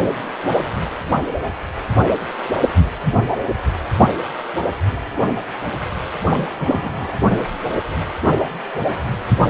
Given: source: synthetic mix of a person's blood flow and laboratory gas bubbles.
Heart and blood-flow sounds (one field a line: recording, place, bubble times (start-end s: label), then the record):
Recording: Doppler ultrasound of blood flow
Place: precordium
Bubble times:
6.25-6.49 s: bubbles
6.58-7.13 s: bubbles
From the record:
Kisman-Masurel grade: 212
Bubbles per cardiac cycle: several, 3 to 8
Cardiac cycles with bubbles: 1 to 10%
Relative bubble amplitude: moderate (0.250 to 0.450)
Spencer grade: 1 (occasional bubble signal discernible with the cardiac motion signal, with majority of cardiac periods free of bubbles)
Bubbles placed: anywhere in the cardiac cycle